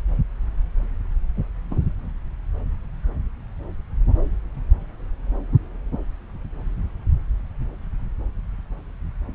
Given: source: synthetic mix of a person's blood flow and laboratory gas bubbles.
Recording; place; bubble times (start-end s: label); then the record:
Doppler ultrasound of blood flow; subclavian vein
1.36-1.43 s: bubbles
1.70-1.80 s: bubbles
From the record:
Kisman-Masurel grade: 122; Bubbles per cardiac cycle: 1 to 2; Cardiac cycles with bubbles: 10 to 50%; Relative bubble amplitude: moderate (0.250 to 0.450); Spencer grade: 2 (many but less than half of the cardiac periods contain bubble signals, singularly or in groups); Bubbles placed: anywhere in the cardiac cycle